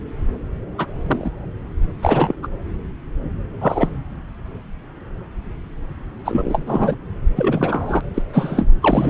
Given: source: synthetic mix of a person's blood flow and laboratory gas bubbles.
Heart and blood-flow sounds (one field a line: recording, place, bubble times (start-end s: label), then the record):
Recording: Doppler ultrasound of blood flow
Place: subclavian vein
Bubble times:
0.78-0.86 s: bubbles
1.06-1.31 s: bubbles
2.02-2.34 s: bubbles
2.42-2.47 s: bubbles
3.60-3.88 s: bubbles
6.25-6.96 s: bubbles
7.35-8.01 s: bubbles
8.14-8.22 s: bubbles
8.33-8.71 s: bubbles
8.81-9.10 s: bubbles
From the record:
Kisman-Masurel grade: 233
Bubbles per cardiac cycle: several, 3 to 8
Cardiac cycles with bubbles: 50 to 99%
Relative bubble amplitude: loud (0.450 to 0.775)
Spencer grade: 3 (all of the cardiac periods contain showers or single bubble signals, but not dominating or overriding the cardiac motion signals)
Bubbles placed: anywhere in the cardiac cycle